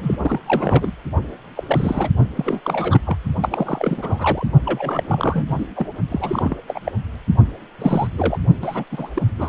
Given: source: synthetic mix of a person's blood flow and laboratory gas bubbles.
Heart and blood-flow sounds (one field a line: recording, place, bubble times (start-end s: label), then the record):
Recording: Doppler ultrasound of blood flow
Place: precordium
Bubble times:
0.00-0.18 s: bubbles
0.21-0.40 s: bubbles
0.46-0.92 s: bubbles
1.56-2.09 s: bubbles
2.35-3.00 s: bubbles
3.04-3.17 s: bubbles
3.42-4.47 s: bubbles
4.65-5.03 s: bubbles
5.08-5.66 s: bubbles
5.75-5.86 s: bubbles
6.08-6.57 s: bubbles
6.67-6.79 s: bubbles
6.85-6.92 s: bubbles
7.79-8.07 s: bubbles
8.13-8.39 s: bubbles
8.62-8.84 s: bubbles
8.91-9.10 s: bubbles
9.15-9.23 s: bubbles
9.38-9.49 s: bubbles
From the record:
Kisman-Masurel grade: 342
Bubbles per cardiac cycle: rolling drumbeat, 9 or more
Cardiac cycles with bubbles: 100%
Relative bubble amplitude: moderate (0.250 to 0.450)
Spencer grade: 3 (all of the cardiac periods contain showers or single bubble signals, but not dominating or overriding the cardiac motion signals)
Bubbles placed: only in the low amplitude regions of the cardiac cycle